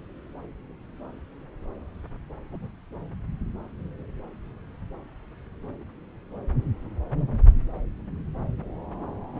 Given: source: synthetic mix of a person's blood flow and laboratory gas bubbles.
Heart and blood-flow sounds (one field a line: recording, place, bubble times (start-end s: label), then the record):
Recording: Doppler ultrasound of blood flow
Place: subclavian vein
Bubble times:
0.00-0.02 s: bubbles
2.50-2.71 s: bubbles
9.35-9.40 s: bubbles
From the record:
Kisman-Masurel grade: 121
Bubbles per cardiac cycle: 1 to 2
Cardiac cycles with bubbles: 10 to 50%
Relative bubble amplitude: barely perceptible (0.100 to 0.250)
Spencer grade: 2 (many but less than half of the cardiac periods contain bubble signals, singularly or in groups)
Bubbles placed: anywhere in the cardiac cycle